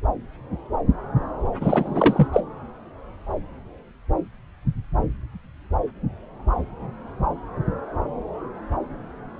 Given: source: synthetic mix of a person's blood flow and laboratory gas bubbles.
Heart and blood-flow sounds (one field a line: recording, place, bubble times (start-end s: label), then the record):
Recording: Doppler ultrasound of blood flow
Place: subclavian vein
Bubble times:
1.60-2.27 s: bubbles
2.32-2.40 s: bubbles
From the record:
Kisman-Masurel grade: 213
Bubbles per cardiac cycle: several, 3 to 8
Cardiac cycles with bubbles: 1 to 10%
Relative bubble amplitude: loud (0.450 to 0.775)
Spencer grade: 1 (occasional bubble signal discernible with the cardiac motion signal, with majority of cardiac periods free of bubbles)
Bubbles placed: anywhere in the cardiac cycle